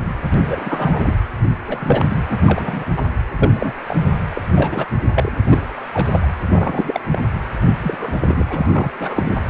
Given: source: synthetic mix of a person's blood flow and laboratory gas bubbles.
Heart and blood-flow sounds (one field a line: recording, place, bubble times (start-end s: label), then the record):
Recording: Doppler ultrasound of blood flow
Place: precordium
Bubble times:
0.34-1.18 s: bubbles
1.67-2.23 s: bubbles
2.29-2.85 s: bubbles
2.96-3.02 s: bubbles
3.25-3.74 s: bubbles
3.88-3.97 s: bubbles
4.30-4.41 s: bubbles
4.55-4.87 s: bubbles
5.14-5.36 s: bubbles
5.46-5.62 s: bubbles
5.94-6.26 s: bubbles
6.52-7.01 s: bubbles
7.12-7.21 s: bubbles
7.82-8.14 s: bubbles
8.21-8.44 s: bubbles
8.48-8.68 s: bubbles
8.71-8.90 s: bubbles
8.99-9.35 s: bubbles
From the record:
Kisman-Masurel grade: 242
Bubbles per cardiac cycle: several, 3 to 8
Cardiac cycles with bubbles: 100%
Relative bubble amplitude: moderate (0.250 to 0.450)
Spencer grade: 3 (all of the cardiac periods contain showers or single bubble signals, but not dominating or overriding the cardiac motion signals)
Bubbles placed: anywhere in the cardiac cycle